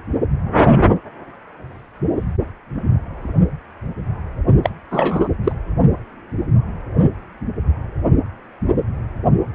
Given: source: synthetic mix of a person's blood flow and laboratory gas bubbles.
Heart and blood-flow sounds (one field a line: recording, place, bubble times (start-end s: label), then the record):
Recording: Doppler ultrasound of blood flow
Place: precordium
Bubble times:
4.63-4.70 s: bubbles
4.91-5.28 s: bubbles
5.44-5.52 s: bubbles
From the record:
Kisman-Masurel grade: 222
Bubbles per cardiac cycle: several, 3 to 8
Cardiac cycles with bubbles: 10 to 50%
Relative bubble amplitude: moderate (0.250 to 0.450)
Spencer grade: 2 (many but less than half of the cardiac periods contain bubble signals, singularly or in groups)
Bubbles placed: only in the low amplitude regions of the cardiac cycle